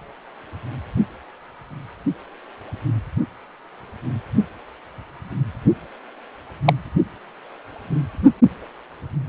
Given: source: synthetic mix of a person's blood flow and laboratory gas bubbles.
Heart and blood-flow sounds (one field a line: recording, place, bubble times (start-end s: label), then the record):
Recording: Doppler ultrasound of blood flow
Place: precordium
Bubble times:
6.64-6.73 s: bubbles
From the record:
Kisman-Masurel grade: 113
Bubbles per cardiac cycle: 1 to 2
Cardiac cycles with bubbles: 1 to 10%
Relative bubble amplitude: loud (0.450 to 0.775)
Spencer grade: 1 (occasional bubble signal discernible with the cardiac motion signal, with majority of cardiac periods free of bubbles)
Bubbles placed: only in the low amplitude regions of the cardiac cycle